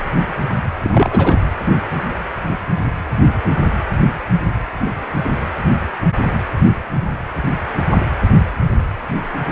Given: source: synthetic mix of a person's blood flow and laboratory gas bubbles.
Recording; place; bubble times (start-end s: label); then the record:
Doppler ultrasound of blood flow; precordium
0.82-1.43 s: bubbles
From the record:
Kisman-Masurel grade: 212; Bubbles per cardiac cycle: several, 3 to 8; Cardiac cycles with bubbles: 1 to 10%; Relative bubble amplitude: moderate (0.250 to 0.450); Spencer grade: 1 (occasional bubble signal discernible with the cardiac motion signal, with majority of cardiac periods free of bubbles); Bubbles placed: anywhere in the cardiac cycle